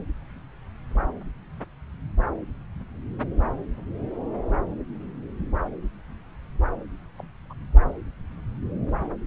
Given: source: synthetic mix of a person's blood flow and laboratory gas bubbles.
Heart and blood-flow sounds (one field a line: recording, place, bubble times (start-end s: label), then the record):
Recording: Doppler ultrasound of blood flow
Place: subclavian vein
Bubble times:
7.18-7.23 s: bubbles
7.50-7.53 s: bubbles
From the record:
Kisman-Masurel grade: 111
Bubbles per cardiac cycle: 1 to 2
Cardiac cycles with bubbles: 1 to 10%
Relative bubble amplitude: barely perceptible (0.100 to 0.250)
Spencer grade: 1 (occasional bubble signal discernible with the cardiac motion signal, with majority of cardiac periods free of bubbles)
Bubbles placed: anywhere in the cardiac cycle